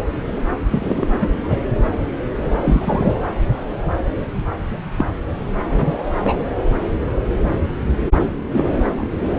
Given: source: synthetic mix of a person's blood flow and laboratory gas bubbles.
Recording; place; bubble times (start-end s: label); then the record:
Doppler ultrasound of blood flow; subclavian vein
0.71-1.08 s: bubbles
1.20-1.27 s: bubbles
1.41-1.61 s: bubbles
2.50-2.56 s: bubbles
2.62-3.13 s: bubbles
4.97-5.05 s: bubbles
5.71-5.92 s: bubbles
6.24-6.38 s: bubbles
8.53-8.71 s: bubbles
8.88-8.94 s: bubbles
8.97-9.10 s: bubbles
From the record:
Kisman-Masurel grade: 122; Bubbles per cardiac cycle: 1 to 2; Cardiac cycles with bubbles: 10 to 50%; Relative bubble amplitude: moderate (0.250 to 0.450); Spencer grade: 2 (many but less than half of the cardiac periods contain bubble signals, singularly or in groups); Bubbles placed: anywhere in the cardiac cycle